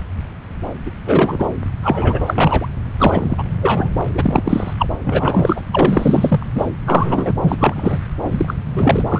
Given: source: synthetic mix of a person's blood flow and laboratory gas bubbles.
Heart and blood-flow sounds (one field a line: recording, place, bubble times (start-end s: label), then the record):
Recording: Doppler ultrasound of blood flow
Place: subclavian vein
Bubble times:
0.85-0.90 s: bubbles
1.06-1.52 s: bubbles
1.81-2.67 s: bubbles
2.98-3.44 s: bubbles
3.62-3.90 s: bubbles
4.14-4.73 s: bubbles
4.78-4.86 s: bubbles
5.03-5.61 s: bubbles
5.72-6.46 s: bubbles
6.54-6.69 s: bubbles
6.85-7.31 s: bubbles
7.42-7.98 s: bubbles
8.23-8.54 s: bubbles
8.76-9.08 s: bubbles
9.11-9.20 s: bubbles
From the record:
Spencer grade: 3 (all of the cardiac periods contain showers or single bubble signals, but not dominating or overriding the cardiac motion signals)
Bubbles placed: anywhere in the cardiac cycle